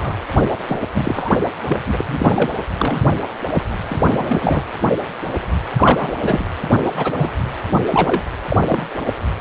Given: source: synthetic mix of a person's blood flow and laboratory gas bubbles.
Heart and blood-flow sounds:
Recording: Doppler ultrasound of blood flow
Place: precordium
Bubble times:
0.00-0.15 s: bubbles
0.68-0.79 s: bubbles
0.95-1.33 s: bubbles
1.67-1.80 s: bubbles
1.87-2.04 s: bubbles
2.08-2.55 s: bubbles
2.78-3.02 s: bubbles
3.54-3.66 s: bubbles
3.88-4.62 s: bubbles
5.76-6.15 s: bubbles
6.23-6.43 s: bubbles
6.85-6.91 s: bubbles
6.95-7.35 s: bubbles
7.73-7.82 s: bubbles
7.90-8.22 s: bubbles
8.49-8.61 s: bubbles
8.66-8.87 s: bubbles
From the record:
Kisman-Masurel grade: 233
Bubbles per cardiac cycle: several, 3 to 8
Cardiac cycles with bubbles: 50 to 99%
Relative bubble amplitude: loud (0.450 to 0.775)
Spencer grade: 3 (all of the cardiac periods contain showers or single bubble signals, but not dominating or overriding the cardiac motion signals)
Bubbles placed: anywhere in the cardiac cycle

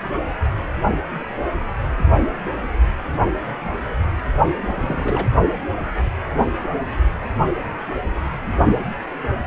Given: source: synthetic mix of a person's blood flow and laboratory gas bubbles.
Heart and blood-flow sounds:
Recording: Doppler ultrasound of blood flow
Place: precordium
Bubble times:
4.67-5.27 s: bubbles
From the record:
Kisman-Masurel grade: 211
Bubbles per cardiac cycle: several, 3 to 8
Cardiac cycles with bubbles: 1 to 10%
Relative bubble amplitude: barely perceptible (0.100 to 0.250)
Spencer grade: 1 (occasional bubble signal discernible with the cardiac motion signal, with majority of cardiac periods free of bubbles)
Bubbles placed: only in the low amplitude regions of the cardiac cycle

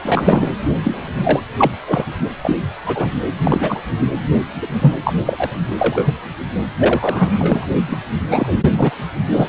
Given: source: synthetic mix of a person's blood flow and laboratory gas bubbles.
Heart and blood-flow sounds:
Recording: Doppler ultrasound of blood flow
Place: precordium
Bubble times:
0.02-0.52 s: bubbles
0.83-1.40 s: bubbles
1.58-1.71 s: bubbles
1.85-2.11 s: bubbles
2.42-2.56 s: bubbles
2.85-3.14 s: bubbles
3.38-3.80 s: bubbles
4.60-4.95 s: bubbles
5.04-5.13 s: bubbles
5.26-5.51 s: bubbles
5.78-6.15 s: bubbles
6.78-7.68 s: bubbles
7.88-7.97 s: bubbles
8.29-8.54 s: bubbles
8.72-8.95 s: bubbles
9.29-9.47 s: bubbles
From the record:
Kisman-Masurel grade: 243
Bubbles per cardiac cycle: several, 3 to 8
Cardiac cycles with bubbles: 100%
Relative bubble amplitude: loud (0.450 to 0.775)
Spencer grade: 3 (all of the cardiac periods contain showers or single bubble signals, but not dominating or overriding the cardiac motion signals)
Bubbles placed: only in the low amplitude regions of the cardiac cycle

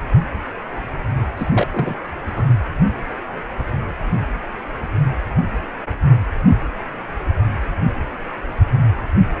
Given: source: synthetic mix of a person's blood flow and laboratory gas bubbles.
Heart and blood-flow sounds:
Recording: Doppler ultrasound of blood flow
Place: precordium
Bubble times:
1.37-1.49 s: bubbles
1.53-1.68 s: bubbles
1.71-1.96 s: bubbles
2.35-2.44 s: bubbles
From the record:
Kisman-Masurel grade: 212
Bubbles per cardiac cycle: several, 3 to 8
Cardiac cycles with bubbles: 1 to 10%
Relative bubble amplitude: moderate (0.250 to 0.450)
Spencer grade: 1 (occasional bubble signal discernible with the cardiac motion signal, with majority of cardiac periods free of bubbles)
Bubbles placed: anywhere in the cardiac cycle

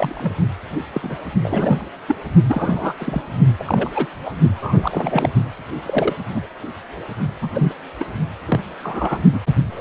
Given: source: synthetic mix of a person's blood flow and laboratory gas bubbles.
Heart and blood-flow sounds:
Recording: Doppler ultrasound of blood flow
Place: precordium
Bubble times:
0.00-0.32 s: bubbles
0.93-1.16 s: bubbles
1.43-1.83 s: bubbles
2.08-2.16 s: bubbles
2.48-2.93 s: bubbles
2.98-3.22 s: bubbles
3.58-3.93 s: bubbles
3.95-4.06 s: bubbles
4.25-4.32 s: bubbles
4.52-5.29 s: bubbles
5.85-6.14 s: bubbles
6.34-6.47 s: bubbles
7.42-7.50 s: bubbles
7.54-7.72 s: bubbles
7.99-8.04 s: bubbles
8.47-8.61 s: bubbles
8.83-9.20 s: bubbles
9.32-9.39 s: bubbles
9.70-9.81 s: bubbles
From the record:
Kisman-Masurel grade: 242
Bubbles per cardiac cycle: several, 3 to 8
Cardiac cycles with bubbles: 100%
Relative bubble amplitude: moderate (0.250 to 0.450)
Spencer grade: 3 (all of the cardiac periods contain showers or single bubble signals, but not dominating or overriding the cardiac motion signals)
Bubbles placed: only in the low amplitude regions of the cardiac cycle

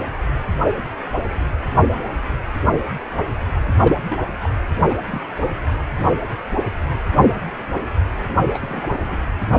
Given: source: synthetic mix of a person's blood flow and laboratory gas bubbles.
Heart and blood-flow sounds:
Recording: Doppler ultrasound of blood flow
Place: precordium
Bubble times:
3.79-3.94 s: bubbles
4.09-4.23 s: bubbles
4.43-4.54 s: bubbles
4.89-4.95 s: bubbles
5.12-5.20 s: bubbles
5.24-5.27 s: bubbles
8.20-8.24 s: bubbles
8.29-8.34 s: bubbles
8.54-9.17 s: bubbles
From the record:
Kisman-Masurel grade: 221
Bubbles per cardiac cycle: several, 3 to 8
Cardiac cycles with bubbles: 10 to 50%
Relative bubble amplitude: barely perceptible (0.100 to 0.250)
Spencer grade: 2 (many but less than half of the cardiac periods contain bubble signals, singularly or in groups)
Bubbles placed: anywhere in the cardiac cycle

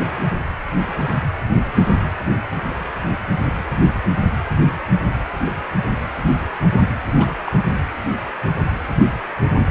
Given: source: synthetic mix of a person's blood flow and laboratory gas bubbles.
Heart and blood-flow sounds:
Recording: Doppler ultrasound of blood flow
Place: precordium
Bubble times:
7.18-7.32 s: bubbles
7.46-7.53 s: bubbles
From the record:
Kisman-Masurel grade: 111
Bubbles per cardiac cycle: 1 to 2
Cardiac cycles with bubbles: 1 to 10%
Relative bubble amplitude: barely perceptible (0.100 to 0.250)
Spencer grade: 1 (occasional bubble signal discernible with the cardiac motion signal, with majority of cardiac periods free of bubbles)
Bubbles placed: anywhere in the cardiac cycle

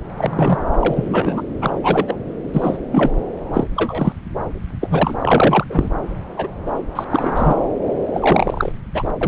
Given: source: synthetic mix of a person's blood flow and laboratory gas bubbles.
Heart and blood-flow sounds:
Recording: Doppler ultrasound of blood flow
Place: subclavian vein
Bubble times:
0.17-0.59 s: bubbles
0.80-1.42 s: bubbles
1.61-1.73 s: bubbles
1.83-2.17 s: bubbles
2.54-2.77 s: bubbles
2.92-3.20 s: bubbles
3.53-3.64 s: bubbles
3.76-4.13 s: bubbles
4.80-5.14 s: bubbles
5.19-5.64 s: bubbles
5.69-5.88 s: bubbles
6.37-6.48 s: bubbles
6.66-6.71 s: bubbles
6.95-7.04 s: bubbles
7.10-7.56 s: bubbles
8.13-8.72 s: bubbles
8.94-9.04 s: bubbles
9.21-9.27 s: bubbles
From the record:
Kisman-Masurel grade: 243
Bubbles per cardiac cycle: several, 3 to 8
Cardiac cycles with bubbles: 100%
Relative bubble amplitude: loud (0.450 to 0.775)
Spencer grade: 3 (all of the cardiac periods contain showers or single bubble signals, but not dominating or overriding the cardiac motion signals)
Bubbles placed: anywhere in the cardiac cycle

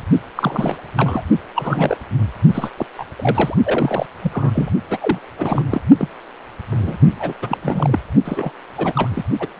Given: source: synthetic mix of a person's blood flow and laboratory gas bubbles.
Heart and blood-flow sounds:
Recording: Doppler ultrasound of blood flow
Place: precordium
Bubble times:
0.35-0.76 s: bubbles
0.96-1.23 s: bubbles
1.56-1.98 s: bubbles
2.54-2.71 s: bubbles
2.77-2.86 s: bubbles
2.98-3.05 s: bubbles
3.16-3.55 s: bubbles
3.63-4.06 s: bubbles
4.21-4.51 s: bubbles
4.54-4.70 s: bubbles
4.90-4.98 s: bubbles
5.00-5.18 s: bubbles
5.38-5.63 s: bubbles
5.70-5.81 s: bubbles
5.99-6.08 s: bubbles
6.71-6.97 s: bubbles
7.19-7.34 s: bubbles
7.42-7.58 s: bubbles
7.62-7.99 s: bubbles
8.25-8.51 s: bubbles
8.77-8.93 s: bubbles
8.96-9.24 s: bubbles
9.40-9.47 s: bubbles
9.57-9.60 s: bubbles
From the record:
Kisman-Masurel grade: 342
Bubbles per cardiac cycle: rolling drumbeat, 9 or more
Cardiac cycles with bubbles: 100%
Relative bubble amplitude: moderate (0.250 to 0.450)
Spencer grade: 3 (all of the cardiac periods contain showers or single bubble signals, but not dominating or overriding the cardiac motion signals)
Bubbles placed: only in the low amplitude regions of the cardiac cycle

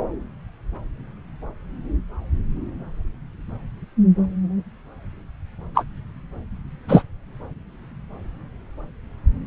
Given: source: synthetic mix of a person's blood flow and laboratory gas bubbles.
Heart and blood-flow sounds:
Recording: Doppler ultrasound of blood flow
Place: subclavian vein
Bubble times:
5.75-5.84 s: bubbles
6.88-7.03 s: bubbles
From the record:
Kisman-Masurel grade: 113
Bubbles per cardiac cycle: 1 to 2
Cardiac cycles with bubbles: 1 to 10%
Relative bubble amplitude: loud (0.450 to 0.775)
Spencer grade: 1 (occasional bubble signal discernible with the cardiac motion signal, with majority of cardiac periods free of bubbles)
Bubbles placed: anywhere in the cardiac cycle

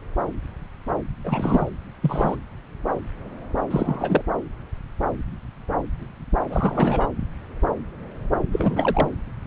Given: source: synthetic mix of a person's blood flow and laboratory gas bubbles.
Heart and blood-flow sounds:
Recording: Doppler ultrasound of blood flow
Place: subclavian vein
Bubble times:
1.24-1.77 s: bubbles
2.01-2.36 s: bubbles
3.70-4.22 s: bubbles
6.50-7.07 s: bubbles
8.52-9.09 s: bubbles
From the record:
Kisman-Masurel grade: 222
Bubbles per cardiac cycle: several, 3 to 8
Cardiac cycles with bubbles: 10 to 50%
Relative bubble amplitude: moderate (0.250 to 0.450)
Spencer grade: 2 (many but less than half of the cardiac periods contain bubble signals, singularly or in groups)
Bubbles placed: anywhere in the cardiac cycle

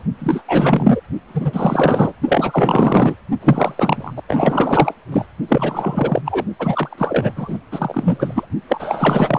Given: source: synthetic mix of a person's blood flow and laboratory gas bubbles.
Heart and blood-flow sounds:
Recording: Doppler ultrasound of blood flow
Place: precordium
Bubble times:
0.00-0.02 s: bubbles
0.18-0.43 s: bubbles
0.48-1.00 s: bubbles
1.28-2.12 s: bubbles
2.28-3.15 s: bubbles
3.41-4.13 s: bubbles
4.16-4.21 s: bubbles
4.28-4.94 s: bubbles
5.12-5.25 s: bubbles
5.48-6.21 s: bubbles
6.25-6.46 s: bubbles
6.59-7.59 s: bubbles
7.71-8.46 s: bubbles
8.68-9.39 s: bubbles
From the record:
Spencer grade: 4 (maximum detectable bubble signal sounding continuously throughout systole and diastole of every cardiac period, and overriding the amplitude of the normal cardiac signals)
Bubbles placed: only in the low amplitude regions of the cardiac cycle

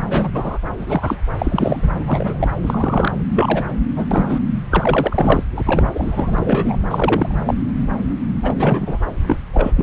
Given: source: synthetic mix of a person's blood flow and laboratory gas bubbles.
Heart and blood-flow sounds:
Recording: Doppler ultrasound of blood flow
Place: subclavian vein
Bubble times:
0.09-0.58 s: bubbles
0.78-1.21 s: bubbles
1.38-2.03 s: bubbles
2.06-2.48 s: bubbles
2.62-3.13 s: bubbles
3.35-3.65 s: bubbles
3.96-4.06 s: bubbles
4.11-4.40 s: bubbles
4.70-5.44 s: bubbles
5.57-5.62 s: bubbles
5.66-6.78 s: bubbles
6.91-7.36 s: bubbles
7.45-7.54 s: bubbles
7.81-7.87 s: bubbles
8.43-8.53 s: bubbles
8.55-8.99 s: bubbles
9.27-9.38 s: bubbles
9.53-9.73 s: bubbles
9.76-9.83 s: bubbles
From the record:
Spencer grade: 3 (all of the cardiac periods contain showers or single bubble signals, but not dominating or overriding the cardiac motion signals)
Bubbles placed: anywhere in the cardiac cycle

